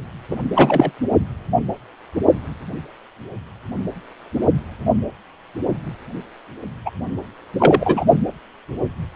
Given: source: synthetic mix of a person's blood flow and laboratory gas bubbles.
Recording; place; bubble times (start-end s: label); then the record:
Doppler ultrasound of blood flow; precordium
0.30-0.36 s: bubbles
0.55-0.91 s: bubbles
6.85-6.90 s: bubbles
7.59-8.04 s: bubbles
From the record:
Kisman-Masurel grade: 223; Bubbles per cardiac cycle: several, 3 to 8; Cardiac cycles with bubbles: 10 to 50%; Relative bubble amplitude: loud (0.450 to 0.775); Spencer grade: 2 (many but less than half of the cardiac periods contain bubble signals, singularly or in groups); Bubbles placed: only in the low amplitude regions of the cardiac cycle